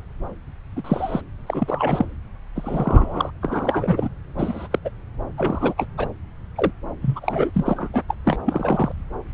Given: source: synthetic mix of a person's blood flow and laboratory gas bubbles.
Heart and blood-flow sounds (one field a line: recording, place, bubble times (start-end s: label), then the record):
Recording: Doppler ultrasound of blood flow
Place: subclavian vein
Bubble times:
0.76-1.21 s: bubbles
1.47-2.05 s: bubbles
2.55-3.30 s: bubbles
3.42-4.08 s: bubbles
4.35-4.67 s: bubbles
4.71-4.79 s: bubbles
4.84-4.89 s: bubbles
5.37-5.73 s: bubbles
5.77-5.86 s: bubbles
5.97-6.08 s: bubbles
6.55-6.71 s: bubbles
7.01-7.51 s: bubbles
7.54-7.89 s: bubbles
7.93-8.01 s: bubbles
8.08-8.15 s: bubbles
8.25-8.38 s: bubbles
8.46-8.92 s: bubbles
From the record:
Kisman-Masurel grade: 232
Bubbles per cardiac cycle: several, 3 to 8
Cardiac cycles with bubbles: 50 to 99%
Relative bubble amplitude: moderate (0.250 to 0.450)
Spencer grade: 3 (all of the cardiac periods contain showers or single bubble signals, but not dominating or overriding the cardiac motion signals)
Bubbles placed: anywhere in the cardiac cycle